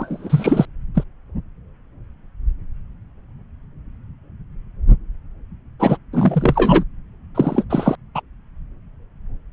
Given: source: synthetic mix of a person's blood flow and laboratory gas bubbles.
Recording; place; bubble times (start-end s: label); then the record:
Doppler ultrasound of blood flow; subclavian vein
0.00-0.66 s: bubbles
0.95-1.03 s: bubbles
5.79-5.97 s: bubbles
6.12-6.83 s: bubbles
7.35-7.65 s: bubbles
7.70-7.96 s: bubbles
8.14-8.21 s: bubbles
From the record:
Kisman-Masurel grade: 223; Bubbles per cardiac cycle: several, 3 to 8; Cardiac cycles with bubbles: 10 to 50%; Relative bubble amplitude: loud (0.450 to 0.775); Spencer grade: 2 (many but less than half of the cardiac periods contain bubble signals, singularly or in groups); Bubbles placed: anywhere in the cardiac cycle